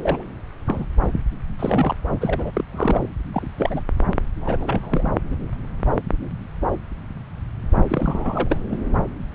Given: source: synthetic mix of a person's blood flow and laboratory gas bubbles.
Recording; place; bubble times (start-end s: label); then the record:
Doppler ultrasound of blood flow; subclavian vein
0.00-0.26 s: bubbles
0.67-0.85 s: bubbles
1.59-1.95 s: bubbles
2.21-2.65 s: bubbles
2.72-3.09 s: bubbles
3.33-3.46 s: bubbles
3.57-3.83 s: bubbles
4.41-5.11 s: bubbles
7.89-8.79 s: bubbles
From the record:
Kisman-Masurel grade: 232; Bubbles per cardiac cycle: several, 3 to 8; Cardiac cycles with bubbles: 50 to 99%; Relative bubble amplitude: moderate (0.250 to 0.450); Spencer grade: 3 (all of the cardiac periods contain showers or single bubble signals, but not dominating or overriding the cardiac motion signals); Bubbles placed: anywhere in the cardiac cycle